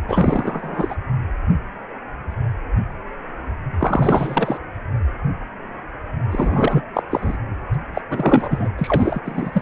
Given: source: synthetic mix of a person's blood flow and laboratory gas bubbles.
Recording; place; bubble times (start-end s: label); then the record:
Doppler ultrasound of blood flow; precordium
0.08-0.95 s: bubbles
3.79-4.58 s: bubbles
6.31-6.83 s: bubbles
6.95-7.03 s: bubbles
7.10-7.37 s: bubbles
7.93-8.02 s: bubbles
8.09-8.69 s: bubbles
8.78-9.20 s: bubbles
9.25-9.62 s: bubbles
From the record:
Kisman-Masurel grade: 333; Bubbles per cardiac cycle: rolling drumbeat, 9 or more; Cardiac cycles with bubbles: 50 to 99%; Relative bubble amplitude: loud (0.450 to 0.775); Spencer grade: 3 (all of the cardiac periods contain showers or single bubble signals, but not dominating or overriding the cardiac motion signals); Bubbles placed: anywhere in the cardiac cycle